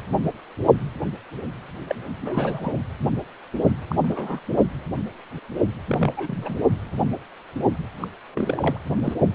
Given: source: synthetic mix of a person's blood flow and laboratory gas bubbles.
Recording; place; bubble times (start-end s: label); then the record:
Doppler ultrasound of blood flow; precordium
1.87-1.95 s: bubbles
2.21-2.73 s: bubbles
3.88-3.96 s: bubbles
4.04-4.40 s: bubbles
5.88-6.13 s: bubbles
6.16-6.57 s: bubbles
8.01-8.08 s: bubbles
8.35-8.79 s: bubbles
9.03-9.14 s: bubbles
From the record:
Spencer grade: 3 (all of the cardiac periods contain showers or single bubble signals, but not dominating or overriding the cardiac motion signals); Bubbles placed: anywhere in the cardiac cycle